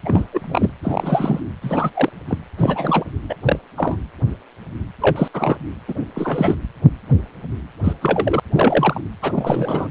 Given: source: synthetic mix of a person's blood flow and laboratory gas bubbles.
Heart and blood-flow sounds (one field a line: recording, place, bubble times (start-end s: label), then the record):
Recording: Doppler ultrasound of blood flow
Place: precordium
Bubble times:
0.03-0.25 s: bubbles
0.32-0.74 s: bubbles
0.82-1.40 s: bubbles
1.61-1.90 s: bubbles
1.94-2.10 s: bubbles
2.28-2.38 s: bubbles
2.58-3.04 s: bubbles
3.29-3.35 s: bubbles
3.43-3.59 s: bubbles
3.77-3.97 s: bubbles
5.00-5.28 s: bubbles
5.33-5.57 s: bubbles
5.88-5.93 s: bubbles
6.15-6.54 s: bubbles
7.83-7.93 s: bubbles
8.01-8.40 s: bubbles
8.53-9.01 s: bubbles
9.21-9.88 s: bubbles
From the record:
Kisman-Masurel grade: 232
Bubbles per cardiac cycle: several, 3 to 8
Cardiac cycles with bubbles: 50 to 99%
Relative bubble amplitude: moderate (0.250 to 0.450)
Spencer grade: 3 (all of the cardiac periods contain showers or single bubble signals, but not dominating or overriding the cardiac motion signals)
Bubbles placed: anywhere in the cardiac cycle